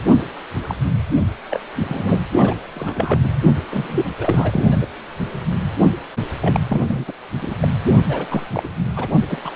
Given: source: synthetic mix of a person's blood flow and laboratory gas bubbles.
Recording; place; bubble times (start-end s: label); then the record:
Doppler ultrasound of blood flow; precordium
0.62-0.75 s: bubbles
1.50-1.59 s: bubbles
1.79-2.23 s: bubbles
2.38-2.55 s: bubbles
2.75-3.19 s: bubbles
3.23-3.35 s: bubbles
3.71-4.10 s: bubbles
4.17-4.63 s: bubbles
4.67-4.86 s: bubbles
6.41-6.60 s: bubbles
6.69-7.04 s: bubbles
7.07-7.12 s: bubbles
7.42-7.55 s: bubbles
7.61-7.68 s: bubbles
8.09-8.26 s: bubbles
8.30-8.48 s: bubbles
8.53-8.69 s: bubbles
8.96-9.08 s: bubbles
9.13-9.22 s: bubbles
9.28-9.40 s: bubbles
9.45-9.52 s: bubbles
From the record:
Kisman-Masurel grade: 242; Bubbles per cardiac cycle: several, 3 to 8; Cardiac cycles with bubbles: 100%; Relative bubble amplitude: moderate (0.250 to 0.450); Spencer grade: 3 (all of the cardiac periods contain showers or single bubble signals, but not dominating or overriding the cardiac motion signals); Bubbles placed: anywhere in the cardiac cycle